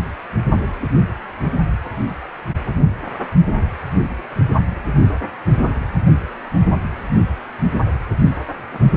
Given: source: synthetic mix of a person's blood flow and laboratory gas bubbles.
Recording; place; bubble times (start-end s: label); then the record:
Doppler ultrasound of blood flow; precordium
8.71-8.86 s: bubbles
From the record:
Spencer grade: 1 (occasional bubble signal discernible with the cardiac motion signal, with majority of cardiac periods free of bubbles); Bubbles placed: only in the low amplitude regions of the cardiac cycle